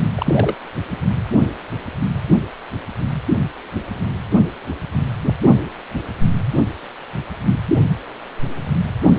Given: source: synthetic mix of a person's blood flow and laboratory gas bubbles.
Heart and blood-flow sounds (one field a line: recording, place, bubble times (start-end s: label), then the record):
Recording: Doppler ultrasound of blood flow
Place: precordium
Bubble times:
0.15-0.54 s: bubbles
From the record:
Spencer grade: 1 (occasional bubble signal discernible with the cardiac motion signal, with majority of cardiac periods free of bubbles)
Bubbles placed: only in the low amplitude regions of the cardiac cycle